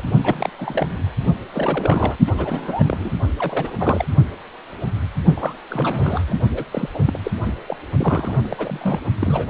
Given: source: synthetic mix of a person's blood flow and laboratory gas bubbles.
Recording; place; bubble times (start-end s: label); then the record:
Doppler ultrasound of blood flow; precordium
0.00-0.04 s: bubbles
0.23-0.49 s: bubbles
0.57-0.97 s: bubbles
1.54-2.16 s: bubbles
2.27-3.14 s: bubbles
3.39-3.71 s: bubbles
3.79-4.05 s: bubbles
5.36-5.54 s: bubbles
5.71-6.39 s: bubbles
6.50-6.63 s: bubbles
6.72-6.89 s: bubbles
6.94-7.19 s: bubbles
7.24-7.31 s: bubbles
7.67-7.76 s: bubbles
7.98-8.38 s: bubbles
8.43-9.00 s: bubbles
9.19-9.49 s: bubbles
From the record:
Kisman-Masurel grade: 332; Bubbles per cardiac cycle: rolling drumbeat, 9 or more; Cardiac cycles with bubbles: 50 to 99%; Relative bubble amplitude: moderate (0.250 to 0.450); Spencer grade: 3 (all of the cardiac periods contain showers or single bubble signals, but not dominating or overriding the cardiac motion signals); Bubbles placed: only in the low amplitude regions of the cardiac cycle